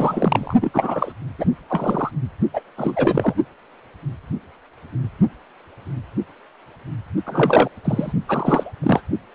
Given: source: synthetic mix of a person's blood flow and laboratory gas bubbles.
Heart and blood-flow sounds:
Doppler ultrasound of blood flow; precordium
0.00-0.55 s: bubbles
0.60-1.12 s: bubbles
1.38-1.46 s: bubbles
1.69-2.12 s: bubbles
2.53-2.62 s: bubbles
2.77-3.35 s: bubbles
7.26-7.69 s: bubbles
7.84-8.12 s: bubbles
8.27-8.72 s: bubbles
8.83-9.03 s: bubbles
From the record:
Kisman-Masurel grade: 333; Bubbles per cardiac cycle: rolling drumbeat, 9 or more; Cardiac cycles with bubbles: 50 to 99%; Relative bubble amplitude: loud (0.450 to 0.775); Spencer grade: 3 (all of the cardiac periods contain showers or single bubble signals, but not dominating or overriding the cardiac motion signals); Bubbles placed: only in the low amplitude regions of the cardiac cycle

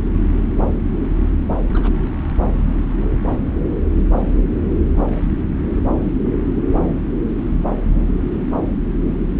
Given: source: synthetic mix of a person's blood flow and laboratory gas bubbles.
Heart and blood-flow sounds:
Doppler ultrasound of blood flow; subclavian vein
1.72-1.91 s: bubbles
From the record:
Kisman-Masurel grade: 121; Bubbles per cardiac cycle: 1 to 2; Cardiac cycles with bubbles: 10 to 50%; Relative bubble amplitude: barely perceptible (0.100 to 0.250); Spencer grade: 2 (many but less than half of the cardiac periods contain bubble signals, singularly or in groups); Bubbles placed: anywhere in the cardiac cycle

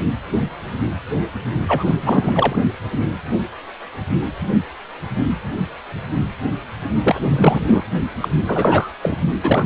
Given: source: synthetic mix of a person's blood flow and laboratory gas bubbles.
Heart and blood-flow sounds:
Doppler ultrasound of blood flow; precordium
1.67-1.95 s: bubbles
2.02-2.56 s: bubbles
7.03-7.16 s: bubbles
7.24-7.61 s: bubbles
7.66-7.83 s: bubbles
8.21-8.29 s: bubbles
8.46-8.91 s: bubbles
9.02-9.15 s: bubbles
9.43-9.66 s: bubbles
From the record:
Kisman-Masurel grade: 333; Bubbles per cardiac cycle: rolling drumbeat, 9 or more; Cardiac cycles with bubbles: 50 to 99%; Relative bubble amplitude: loud (0.450 to 0.775); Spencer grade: 3 (all of the cardiac periods contain showers or single bubble signals, but not dominating or overriding the cardiac motion signals); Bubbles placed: only in the low amplitude regions of the cardiac cycle

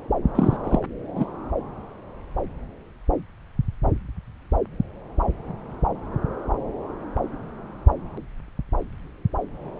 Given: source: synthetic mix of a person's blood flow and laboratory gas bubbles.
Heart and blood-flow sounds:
Doppler ultrasound of blood flow; subclavian vein
0.35-0.56 s: bubbles
0.64-0.79 s: bubbles
1.15-1.25 s: bubbles
From the record:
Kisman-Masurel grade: 123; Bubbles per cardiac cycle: 1 to 2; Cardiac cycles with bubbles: 10 to 50%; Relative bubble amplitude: loud (0.450 to 0.775); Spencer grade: 2 (many but less than half of the cardiac periods contain bubble signals, singularly or in groups); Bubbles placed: anywhere in the cardiac cycle

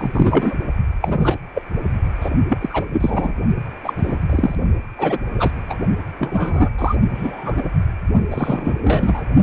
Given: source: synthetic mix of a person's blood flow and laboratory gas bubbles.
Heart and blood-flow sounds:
Doppler ultrasound of blood flow; precordium
0.00-0.54 s: bubbles
1.02-1.38 s: bubbles
1.55-1.62 s: bubbles
2.20-2.30 s: bubbles
2.49-2.58 s: bubbles
2.60-2.85 s: bubbles
2.92-3.34 s: bubbles
3.83-3.93 s: bubbles
3.96-4.18 s: bubbles
4.29-4.55 s: bubbles
4.96-5.18 s: bubbles
5.38-5.53 s: bubbles
5.69-5.76 s: bubbles
6.19-6.69 s: bubbles
6.78-6.96 s: bubbles
7.14-7.63 s: bubbles
8.31-8.78 s: bubbles
8.84-9.26 s: bubbles
From the record:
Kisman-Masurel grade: 243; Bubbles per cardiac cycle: several, 3 to 8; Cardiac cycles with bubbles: 100%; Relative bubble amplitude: loud (0.450 to 0.775); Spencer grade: 3 (all of the cardiac periods contain showers or single bubble signals, but not dominating or overriding the cardiac motion signals); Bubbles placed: only in the low amplitude regions of the cardiac cycle

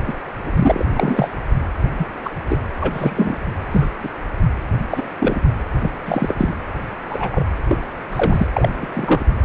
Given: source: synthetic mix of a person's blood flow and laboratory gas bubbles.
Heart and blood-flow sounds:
Doppler ultrasound of blood flow; precordium
0.00-0.04 s: bubbles
0.07-0.13 s: bubbles
0.41-0.86 s: bubbles
0.94-1.30 s: bubbles
1.98-2.06 s: bubbles
2.24-2.30 s: bubbles
2.48-2.59 s: bubbles
2.81-3.38 s: bubbles
3.71-3.87 s: bubbles
4.03-4.09 s: bubbles
4.90-5.03 s: bubbles
5.19-5.40 s: bubbles
5.81-5.91 s: bubbles
6.05-6.34 s: bubbles
6.38-6.54 s: bubbles
7.09-7.45 s: bubbles
7.68-7.78 s: bubbles
8.11-8.46 s: bubbles
8.53-9.24 s: bubbles
From the record:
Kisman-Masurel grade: 243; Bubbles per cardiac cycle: several, 3 to 8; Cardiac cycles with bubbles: 100%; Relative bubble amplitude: loud (0.450 to 0.775); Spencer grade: 3 (all of the cardiac periods contain showers or single bubble signals, but not dominating or overriding the cardiac motion signals); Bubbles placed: anywhere in the cardiac cycle

